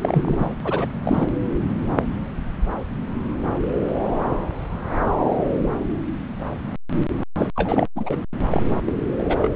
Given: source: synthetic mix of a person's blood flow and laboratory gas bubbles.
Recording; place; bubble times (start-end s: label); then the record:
Doppler ultrasound of blood flow; subclavian vein
0.00-0.54 s: bubbles
0.64-0.87 s: bubbles
1.03-1.26 s: bubbles
7.38-7.47 s: bubbles
7.55-7.88 s: bubbles
7.96-8.16 s: bubbles
8.49-8.63 s: bubbles
8.86-8.93 s: bubbles
9.18-9.51 s: bubbles
From the record:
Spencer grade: 3 (all of the cardiac periods contain showers or single bubble signals, but not dominating or overriding the cardiac motion signals); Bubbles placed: anywhere in the cardiac cycle